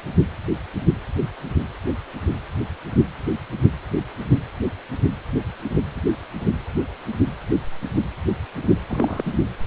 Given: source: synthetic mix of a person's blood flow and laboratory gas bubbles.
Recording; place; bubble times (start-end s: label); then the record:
Doppler ultrasound of blood flow; precordium
8.88-9.24 s: bubbles
From the record:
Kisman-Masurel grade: 112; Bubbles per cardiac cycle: 1 to 2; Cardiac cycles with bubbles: 1 to 10%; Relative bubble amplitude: moderate (0.250 to 0.450); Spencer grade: 1 (occasional bubble signal discernible with the cardiac motion signal, with majority of cardiac periods free of bubbles); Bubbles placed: anywhere in the cardiac cycle